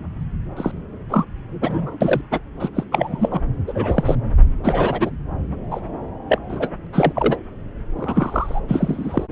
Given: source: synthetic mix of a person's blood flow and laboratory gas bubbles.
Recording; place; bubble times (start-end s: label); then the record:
Doppler ultrasound of blood flow; subclavian vein
0.57-0.71 s: bubbles
1.09-1.25 s: bubbles
1.47-2.21 s: bubbles
2.31-2.40 s: bubbles
2.59-2.69 s: bubbles
2.75-2.84 s: bubbles
2.92-3.40 s: bubbles
3.67-4.15 s: bubbles
4.63-5.10 s: bubbles
5.71-5.80 s: bubbles
6.28-6.38 s: bubbles
6.49-6.68 s: bubbles
6.92-7.38 s: bubbles
7.97-8.60 s: bubbles
8.68-9.26 s: bubbles
From the record:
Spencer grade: 3 (all of the cardiac periods contain showers or single bubble signals, but not dominating or overriding the cardiac motion signals); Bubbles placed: anywhere in the cardiac cycle